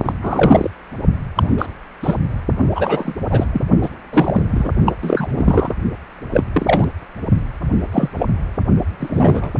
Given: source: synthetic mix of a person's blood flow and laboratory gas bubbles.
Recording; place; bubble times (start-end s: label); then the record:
Doppler ultrasound of blood flow; precordium
0.05-0.13 s: bubbles
0.22-0.70 s: bubbles
1.35-1.49 s: bubbles
1.57-1.67 s: bubbles
2.03-2.16 s: bubbles
2.75-3.14 s: bubbles
3.29-3.46 s: bubbles
3.52-3.61 s: bubbles
3.82-3.90 s: bubbles
4.12-4.46 s: bubbles
4.50-4.70 s: bubbles
4.85-4.93 s: bubbles
5.02-5.74 s: bubbles
6.32-6.44 s: bubbles
6.53-6.84 s: bubbles
7.92-8.09 s: bubbles
8.14-8.27 s: bubbles
8.98-9.52 s: bubbles
From the record:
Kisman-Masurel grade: 243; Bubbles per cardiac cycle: several, 3 to 8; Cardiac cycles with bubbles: 100%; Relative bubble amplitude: loud (0.450 to 0.775); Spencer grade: 3 (all of the cardiac periods contain showers or single bubble signals, but not dominating or overriding the cardiac motion signals); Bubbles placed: only in the low amplitude regions of the cardiac cycle